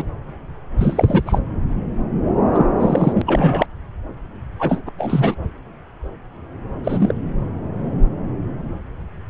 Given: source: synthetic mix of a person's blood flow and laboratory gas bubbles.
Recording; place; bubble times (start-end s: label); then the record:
Doppler ultrasound of blood flow; subclavian vein
0.00-0.08 s: bubbles
0.78-1.39 s: bubbles
2.54-2.66 s: bubbles
2.79-3.21 s: bubbles
3.26-3.66 s: bubbles
4.58-4.80 s: bubbles
4.86-4.89 s: bubbles
4.97-5.35 s: bubbles
6.84-7.21 s: bubbles
From the record:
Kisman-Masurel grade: 222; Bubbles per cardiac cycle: several, 3 to 8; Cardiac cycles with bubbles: 10 to 50%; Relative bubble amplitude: moderate (0.250 to 0.450); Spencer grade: 2 (many but less than half of the cardiac periods contain bubble signals, singularly or in groups); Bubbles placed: anywhere in the cardiac cycle